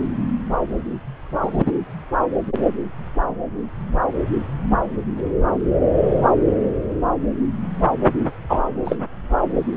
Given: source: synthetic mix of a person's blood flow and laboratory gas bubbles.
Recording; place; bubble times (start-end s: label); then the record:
Doppler ultrasound of blood flow; subclavian vein
1.42-1.62 s: bubbles
1.66-1.72 s: bubbles
8.50-8.61 s: bubbles
8.85-8.98 s: bubbles
From the record:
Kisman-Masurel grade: 123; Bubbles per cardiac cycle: 1 to 2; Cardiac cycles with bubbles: 10 to 50%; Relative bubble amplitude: loud (0.450 to 0.775); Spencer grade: 2 (many but less than half of the cardiac periods contain bubble signals, singularly or in groups); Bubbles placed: anywhere in the cardiac cycle